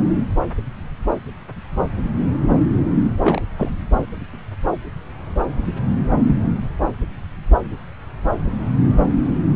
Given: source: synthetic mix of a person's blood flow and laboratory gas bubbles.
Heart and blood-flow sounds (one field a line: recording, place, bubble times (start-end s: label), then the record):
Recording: Doppler ultrasound of blood flow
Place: subclavian vein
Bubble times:
3.21-3.42 s: bubbles
3.56-3.69 s: bubbles
From the record:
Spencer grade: 1 (occasional bubble signal discernible with the cardiac motion signal, with majority of cardiac periods free of bubbles)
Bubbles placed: anywhere in the cardiac cycle